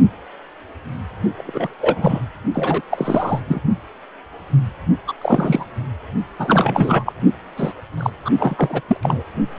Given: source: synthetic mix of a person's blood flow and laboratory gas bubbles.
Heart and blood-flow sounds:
Doppler ultrasound of blood flow; precordium
1.36-1.75 s: bubbles
1.80-2.22 s: bubbles
2.54-2.81 s: bubbles
2.90-3.42 s: bubbles
3.48-3.61 s: bubbles
5.07-5.13 s: bubbles
5.21-5.66 s: bubbles
6.38-7.12 s: bubbles
7.56-7.72 s: bubbles
7.97-8.10 s: bubbles
8.25-8.30 s: bubbles
8.38-8.81 s: bubbles
8.88-8.97 s: bubbles
9.03-9.24 s: bubbles
From the record:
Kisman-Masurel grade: 333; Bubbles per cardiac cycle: rolling drumbeat, 9 or more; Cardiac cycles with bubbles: 50 to 99%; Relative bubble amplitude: loud (0.450 to 0.775); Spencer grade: 3 (all of the cardiac periods contain showers or single bubble signals, but not dominating or overriding the cardiac motion signals); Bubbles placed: only in the low amplitude regions of the cardiac cycle

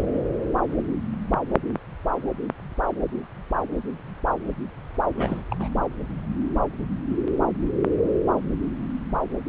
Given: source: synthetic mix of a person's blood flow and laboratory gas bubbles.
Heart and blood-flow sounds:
Doppler ultrasound of blood flow; subclavian vein
5.15-5.42 s: bubbles
5.50-5.55 s: bubbles
5.59-5.68 s: bubbles
From the record:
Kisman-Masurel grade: 211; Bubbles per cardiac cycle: several, 3 to 8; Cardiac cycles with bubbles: 1 to 10%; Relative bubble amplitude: barely perceptible (0.100 to 0.250); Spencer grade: 1 (occasional bubble signal discernible with the cardiac motion signal, with majority of cardiac periods free of bubbles); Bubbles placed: anywhere in the cardiac cycle

